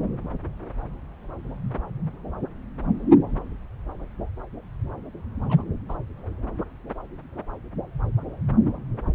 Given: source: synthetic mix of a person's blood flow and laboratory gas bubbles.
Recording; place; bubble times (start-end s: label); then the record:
Doppler ultrasound of blood flow; subclavian vein
5.50-5.62 s: bubbles
5.88-5.96 s: bubbles
From the record:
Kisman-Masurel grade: 111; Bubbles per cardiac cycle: 1 to 2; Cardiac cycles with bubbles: 1 to 10%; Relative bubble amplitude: barely perceptible (0.100 to 0.250); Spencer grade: 1 (occasional bubble signal discernible with the cardiac motion signal, with majority of cardiac periods free of bubbles); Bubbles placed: anywhere in the cardiac cycle